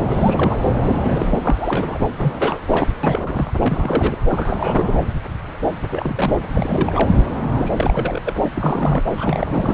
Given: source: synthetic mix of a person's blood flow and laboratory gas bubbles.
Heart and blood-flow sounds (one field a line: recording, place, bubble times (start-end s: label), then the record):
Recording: Doppler ultrasound of blood flow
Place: subclavian vein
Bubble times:
0.09-0.66 s: bubbles
0.83-1.99 s: bubbles
2.17-2.59 s: bubbles
2.67-2.88 s: bubbles
3.03-3.52 s: bubbles
3.59-4.16 s: bubbles
4.29-4.95 s: bubbles
5.89-6.38 s: bubbles
6.53-7.10 s: bubbles
7.57-8.22 s: bubbles
8.26-8.36 s: bubbles
8.43-8.49 s: bubbles
8.54-9.04 s: bubbles
9.18-9.74 s: bubbles
From the record:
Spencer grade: 3 (all of the cardiac periods contain showers or single bubble signals, but not dominating or overriding the cardiac motion signals)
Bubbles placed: anywhere in the cardiac cycle